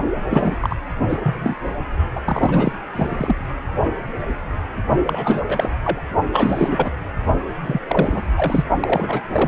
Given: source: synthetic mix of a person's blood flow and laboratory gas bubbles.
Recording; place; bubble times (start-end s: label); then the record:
Doppler ultrasound of blood flow; precordium
0.30-0.55 s: bubbles
0.61-0.75 s: bubbles
1.02-1.20 s: bubbles
1.23-1.57 s: bubbles
2.15-2.21 s: bubbles
2.25-2.73 s: bubbles
2.93-3.36 s: bubbles
5.06-5.43 s: bubbles
5.48-5.69 s: bubbles
5.84-6.02 s: bubbles
6.33-6.90 s: bubbles
7.62-7.79 s: bubbles
7.88-8.23 s: bubbles
8.36-8.63 s: bubbles
8.80-9.21 s: bubbles
9.33-9.48 s: bubbles
From the record:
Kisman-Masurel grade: 332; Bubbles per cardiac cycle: rolling drumbeat, 9 or more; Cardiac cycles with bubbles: 50 to 99%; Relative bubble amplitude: moderate (0.250 to 0.450); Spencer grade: 3 (all of the cardiac periods contain showers or single bubble signals, but not dominating or overriding the cardiac motion signals); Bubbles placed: only in the low amplitude regions of the cardiac cycle